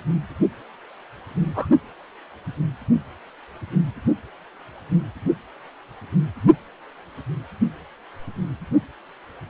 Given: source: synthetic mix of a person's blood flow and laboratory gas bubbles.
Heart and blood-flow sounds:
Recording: Doppler ultrasound of blood flow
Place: precordium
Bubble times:
1.44-1.67 s: bubbles
From the record:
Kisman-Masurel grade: 122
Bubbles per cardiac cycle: 1 to 2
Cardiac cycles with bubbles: 10 to 50%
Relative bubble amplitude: moderate (0.250 to 0.450)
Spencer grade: 2 (many but less than half of the cardiac periods contain bubble signals, singularly or in groups)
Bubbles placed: only in the low amplitude regions of the cardiac cycle

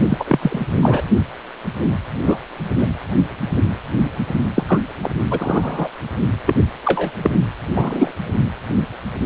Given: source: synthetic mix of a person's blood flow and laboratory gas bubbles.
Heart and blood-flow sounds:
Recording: Doppler ultrasound of blood flow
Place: precordium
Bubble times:
0.09-0.24 s: bubbles
0.27-0.67 s: bubbles
0.81-1.02 s: bubbles
2.27-2.38 s: bubbles
2.78-2.87 s: bubbles
4.55-4.79 s: bubbles
5.03-5.10 s: bubbles
5.30-5.89 s: bubbles
6.46-6.55 s: bubbles
6.84-7.11 s: bubbles
7.18-7.31 s: bubbles
7.76-8.11 s: bubbles
From the record:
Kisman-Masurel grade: 233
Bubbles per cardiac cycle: several, 3 to 8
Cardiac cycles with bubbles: 50 to 99%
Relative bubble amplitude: loud (0.450 to 0.775)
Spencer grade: 3 (all of the cardiac periods contain showers or single bubble signals, but not dominating or overriding the cardiac motion signals)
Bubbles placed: only in the low amplitude regions of the cardiac cycle

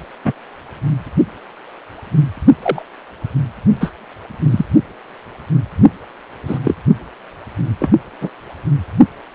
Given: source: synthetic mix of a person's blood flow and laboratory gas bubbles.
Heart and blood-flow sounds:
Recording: Doppler ultrasound of blood flow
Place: precordium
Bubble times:
0.24-0.33 s: bubbles
2.62-2.82 s: bubbles
3.80-3.92 s: bubbles
4.51-4.65 s: bubbles
6.47-6.58 s: bubbles
6.64-6.75 s: bubbles
7.79-7.91 s: bubbles
8.21-8.29 s: bubbles
From the record:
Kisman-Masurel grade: 123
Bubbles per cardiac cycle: 1 to 2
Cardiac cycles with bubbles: 10 to 50%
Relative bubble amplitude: loud (0.450 to 0.775)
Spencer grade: 2 (many but less than half of the cardiac periods contain bubble signals, singularly or in groups)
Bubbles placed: only in the low amplitude regions of the cardiac cycle

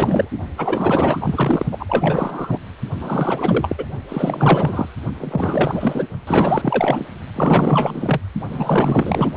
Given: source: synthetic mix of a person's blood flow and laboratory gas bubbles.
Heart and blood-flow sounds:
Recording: Doppler ultrasound of blood flow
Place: precordium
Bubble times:
0.00-0.30 s: bubbles
0.58-1.66 s: bubbles
1.71-2.59 s: bubbles
3.00-3.86 s: bubbles
4.08-4.86 s: bubbles
5.20-6.08 s: bubbles
6.25-7.06 s: bubbles
7.35-8.21 s: bubbles
8.47-9.32 s: bubbles
From the record:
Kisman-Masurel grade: 444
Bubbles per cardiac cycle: continuous sound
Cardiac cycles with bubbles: 100%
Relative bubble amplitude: maximal (0.775 to 0.999)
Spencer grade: 4 (maximum detectable bubble signal sounding continuously throughout systole and diastole of every cardiac period, and overriding the amplitude of the normal cardiac signals)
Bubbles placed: only in the low amplitude regions of the cardiac cycle

